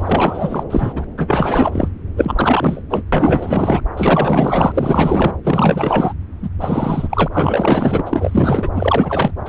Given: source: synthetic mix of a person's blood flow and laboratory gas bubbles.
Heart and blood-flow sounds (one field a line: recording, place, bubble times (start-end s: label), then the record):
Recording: Doppler ultrasound of blood flow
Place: subclavian vein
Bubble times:
0.00-0.64 s: bubbles
0.70-1.04 s: bubbles
1.17-1.88 s: bubbles
2.16-2.82 s: bubbles
2.90-3.03 s: bubbles
3.12-3.81 s: bubbles
3.96-5.37 s: bubbles
5.43-6.13 s: bubbles
6.42-6.49 s: bubbles
6.60-7.29 s: bubbles
7.33-8.70 s: bubbles
8.73-9.31 s: bubbles
9.45-9.48 s: bubbles
From the record:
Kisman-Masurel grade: 444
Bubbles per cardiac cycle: continuous sound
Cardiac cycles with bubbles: 100%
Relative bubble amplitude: maximal (0.775 to 0.999)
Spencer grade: 4 (maximum detectable bubble signal sounding continuously throughout systole and diastole of every cardiac period, and overriding the amplitude of the normal cardiac signals)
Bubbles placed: anywhere in the cardiac cycle